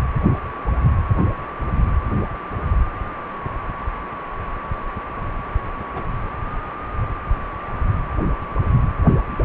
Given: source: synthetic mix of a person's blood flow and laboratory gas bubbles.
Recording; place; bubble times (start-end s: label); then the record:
Doppler ultrasound of blood flow; precordium
5.96-6.03 s: bubbles
From the record:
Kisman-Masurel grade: 121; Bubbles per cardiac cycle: 1 to 2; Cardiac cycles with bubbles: 10 to 50%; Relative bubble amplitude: barely perceptible (0.100 to 0.250); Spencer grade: 2 (many but less than half of the cardiac periods contain bubble signals, singularly or in groups); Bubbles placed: anywhere in the cardiac cycle